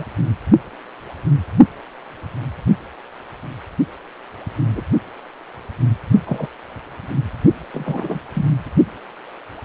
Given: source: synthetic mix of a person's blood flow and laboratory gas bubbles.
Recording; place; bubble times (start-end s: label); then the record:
Doppler ultrasound of blood flow; precordium
0.00-0.04 s: bubbles
4.71-4.81 s: bubbles
6.26-6.47 s: bubbles
7.74-8.20 s: bubbles
8.34-8.46 s: bubbles
From the record:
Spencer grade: 2 (many but less than half of the cardiac periods contain bubble signals, singularly or in groups); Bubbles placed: only in the low amplitude regions of the cardiac cycle